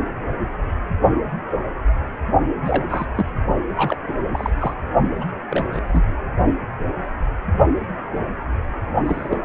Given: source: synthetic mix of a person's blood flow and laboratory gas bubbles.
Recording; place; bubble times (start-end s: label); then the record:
Doppler ultrasound of blood flow; precordium
2.65-2.85 s: bubbles
2.89-3.06 s: bubbles
3.15-3.26 s: bubbles
3.77-3.98 s: bubbles
4.06-4.16 s: bubbles
4.32-4.50 s: bubbles
4.58-4.75 s: bubbles
5.18-5.25 s: bubbles
5.50-5.81 s: bubbles
5.88-6.03 s: bubbles
9.05-9.38 s: bubbles
From the record:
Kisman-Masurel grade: 232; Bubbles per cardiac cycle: several, 3 to 8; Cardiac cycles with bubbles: 50 to 99%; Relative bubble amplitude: moderate (0.250 to 0.450); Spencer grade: 3 (all of the cardiac periods contain showers or single bubble signals, but not dominating or overriding the cardiac motion signals); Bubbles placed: only in the low amplitude regions of the cardiac cycle